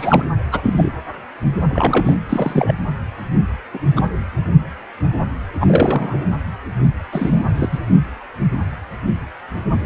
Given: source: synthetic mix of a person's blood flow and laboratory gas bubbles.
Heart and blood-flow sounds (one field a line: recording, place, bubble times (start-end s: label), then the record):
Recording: Doppler ultrasound of blood flow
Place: precordium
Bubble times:
0.00-0.25 s: bubbles
0.51-0.91 s: bubbles
1.70-2.15 s: bubbles
2.29-2.74 s: bubbles
3.74-3.80 s: bubbles
3.96-4.08 s: bubbles
5.61-6.28 s: bubbles
7.12-7.44 s: bubbles
7.54-7.69 s: bubbles
7.72-7.79 s: bubbles
From the record:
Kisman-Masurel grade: 232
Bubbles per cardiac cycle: several, 3 to 8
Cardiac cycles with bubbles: 50 to 99%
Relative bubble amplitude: moderate (0.250 to 0.450)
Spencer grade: 3 (all of the cardiac periods contain showers or single bubble signals, but not dominating or overriding the cardiac motion signals)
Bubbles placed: anywhere in the cardiac cycle